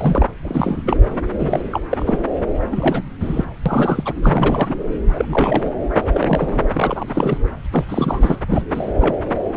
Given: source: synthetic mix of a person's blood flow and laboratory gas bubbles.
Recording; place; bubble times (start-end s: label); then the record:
Doppler ultrasound of blood flow; subclavian vein
0.00-0.26 s: bubbles
0.42-0.82 s: bubbles
0.86-0.97 s: bubbles
1.39-1.62 s: bubbles
1.70-1.81 s: bubbles
1.90-2.21 s: bubbles
2.72-3.02 s: bubbles
3.20-3.45 s: bubbles
3.66-4.13 s: bubbles
4.23-4.74 s: bubbles
5.12-5.25 s: bubbles
5.32-5.62 s: bubbles
5.95-6.02 s: bubbles
6.13-6.70 s: bubbles
6.73-7.38 s: bubbles
7.71-7.84 s: bubbles
7.89-8.38 s: bubbles
8.48-8.62 s: bubbles
8.74-8.89 s: bubbles
9.01-9.18 s: bubbles
From the record:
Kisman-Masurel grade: 342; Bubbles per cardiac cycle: rolling drumbeat, 9 or more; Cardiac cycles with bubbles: 100%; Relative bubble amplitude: moderate (0.250 to 0.450); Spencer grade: 3 (all of the cardiac periods contain showers or single bubble signals, but not dominating or overriding the cardiac motion signals); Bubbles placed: anywhere in the cardiac cycle